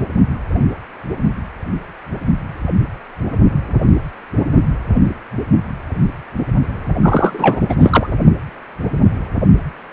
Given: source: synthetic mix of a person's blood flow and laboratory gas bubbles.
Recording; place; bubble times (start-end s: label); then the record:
Doppler ultrasound of blood flow; precordium
7.01-7.61 s: bubbles
7.68-7.75 s: bubbles
7.79-8.07 s: bubbles
From the record:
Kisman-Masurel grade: 223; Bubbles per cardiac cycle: several, 3 to 8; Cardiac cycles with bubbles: 10 to 50%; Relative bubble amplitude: loud (0.450 to 0.775); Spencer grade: 2 (many but less than half of the cardiac periods contain bubble signals, singularly or in groups); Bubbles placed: anywhere in the cardiac cycle